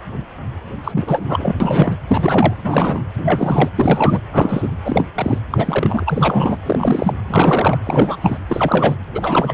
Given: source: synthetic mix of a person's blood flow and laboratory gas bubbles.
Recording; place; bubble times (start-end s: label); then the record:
Doppler ultrasound of blood flow; precordium
0.84-1.53 s: bubbles
1.60-1.97 s: bubbles
2.08-2.53 s: bubbles
2.64-3.02 s: bubbles
3.17-3.69 s: bubbles
3.75-4.20 s: bubbles
4.33-4.68 s: bubbles
4.84-5.05 s: bubbles
5.14-5.38 s: bubbles
5.50-6.57 s: bubbles
6.66-7.13 s: bubbles
7.28-7.79 s: bubbles
7.84-8.17 s: bubbles
8.21-8.37 s: bubbles
8.49-8.96 s: bubbles
9.14-9.54 s: bubbles
From the record:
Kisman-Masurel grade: 333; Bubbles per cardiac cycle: rolling drumbeat, 9 or more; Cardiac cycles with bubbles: 50 to 99%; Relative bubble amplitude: loud (0.450 to 0.775); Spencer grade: 3 (all of the cardiac periods contain showers or single bubble signals, but not dominating or overriding the cardiac motion signals); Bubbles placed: anywhere in the cardiac cycle